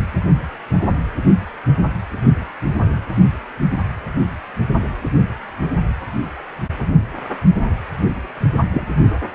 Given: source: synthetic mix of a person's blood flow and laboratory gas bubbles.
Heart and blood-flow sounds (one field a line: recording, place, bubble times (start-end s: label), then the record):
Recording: Doppler ultrasound of blood flow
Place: precordium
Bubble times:
8.72-8.87 s: bubbles
From the record:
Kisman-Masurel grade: 112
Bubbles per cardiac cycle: 1 to 2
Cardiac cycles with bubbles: 1 to 10%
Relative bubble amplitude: moderate (0.250 to 0.450)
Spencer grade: 1 (occasional bubble signal discernible with the cardiac motion signal, with majority of cardiac periods free of bubbles)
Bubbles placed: only in the low amplitude regions of the cardiac cycle